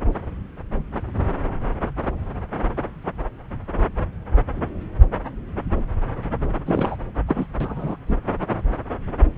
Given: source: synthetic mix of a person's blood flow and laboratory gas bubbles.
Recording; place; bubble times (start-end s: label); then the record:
Doppler ultrasound of blood flow; subclavian vein
6.66-6.96 s: bubbles
7.27-7.46 s: bubbles
7.60-7.96 s: bubbles
8.07-8.16 s: bubbles
From the record:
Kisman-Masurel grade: 222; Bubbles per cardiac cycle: several, 3 to 8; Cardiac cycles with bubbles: 10 to 50%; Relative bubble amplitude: moderate (0.250 to 0.450); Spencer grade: 2 (many but less than half of the cardiac periods contain bubble signals, singularly or in groups); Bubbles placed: anywhere in the cardiac cycle